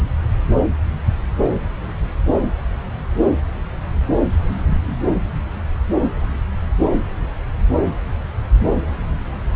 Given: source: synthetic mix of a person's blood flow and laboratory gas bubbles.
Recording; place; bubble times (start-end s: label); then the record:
Doppler ultrasound of blood flow; subclavian vein
no bubbles
From the record:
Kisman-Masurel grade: 000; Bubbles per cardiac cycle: 0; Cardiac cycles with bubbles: 0%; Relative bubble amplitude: no bubbles discernible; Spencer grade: 0 (complete lack of bubble signals)